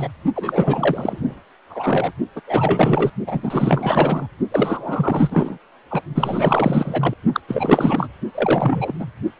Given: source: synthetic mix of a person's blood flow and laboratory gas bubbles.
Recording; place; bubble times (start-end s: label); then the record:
Doppler ultrasound of blood flow; precordium
0.00-0.09 s: bubbles
0.35-1.42 s: bubbles
1.70-2.12 s: bubbles
2.35-2.41 s: bubbles
2.47-3.10 s: bubbles
3.26-4.27 s: bubbles
4.51-5.58 s: bubbles
5.91-6.02 s: bubbles
6.15-7.13 s: bubbles
7.33-7.40 s: bubbles
7.48-8.09 s: bubbles
8.34-8.94 s: bubbles
8.99-9.05 s: bubbles
From the record:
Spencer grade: 4 (maximum detectable bubble signal sounding continuously throughout systole and diastole of every cardiac period, and overriding the amplitude of the normal cardiac signals); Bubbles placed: only in the low amplitude regions of the cardiac cycle